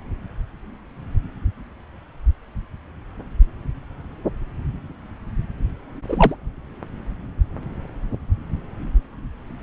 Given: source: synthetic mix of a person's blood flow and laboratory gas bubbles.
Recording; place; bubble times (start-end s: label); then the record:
Doppler ultrasound of blood flow; subclavian vein
6.08-6.35 s: bubbles
From the record:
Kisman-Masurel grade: 123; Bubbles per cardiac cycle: 1 to 2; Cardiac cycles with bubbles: 10 to 50%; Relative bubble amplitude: loud (0.450 to 0.775); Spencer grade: 2 (many but less than half of the cardiac periods contain bubble signals, singularly or in groups); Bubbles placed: anywhere in the cardiac cycle